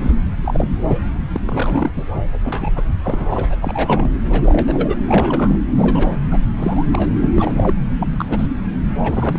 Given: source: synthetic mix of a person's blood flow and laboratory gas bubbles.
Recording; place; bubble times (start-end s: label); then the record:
Doppler ultrasound of blood flow; subclavian vein
0.00-0.15 s: bubbles
0.44-0.77 s: bubbles
0.87-0.96 s: bubbles
1.33-1.42 s: bubbles
1.48-1.90 s: bubbles
1.96-2.03 s: bubbles
2.15-2.22 s: bubbles
2.44-2.71 s: bubbles
2.76-2.82 s: bubbles
3.03-3.55 s: bubbles
3.61-4.10 s: bubbles
4.29-4.97 s: bubbles
5.08-5.57 s: bubbles
5.74-6.19 s: bubbles
6.31-6.40 s: bubbles
6.57-6.86 s: bubbles
6.93-7.08 s: bubbles
7.22-7.27 s: bubbles
7.35-7.78 s: bubbles
7.97-8.26 s: bubbles
8.29-8.47 s: bubbles
9.04-9.38 s: bubbles
From the record:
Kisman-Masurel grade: 242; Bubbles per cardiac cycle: several, 3 to 8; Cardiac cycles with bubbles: 100%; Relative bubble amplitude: moderate (0.250 to 0.450); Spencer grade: 3 (all of the cardiac periods contain showers or single bubble signals, but not dominating or overriding the cardiac motion signals); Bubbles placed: anywhere in the cardiac cycle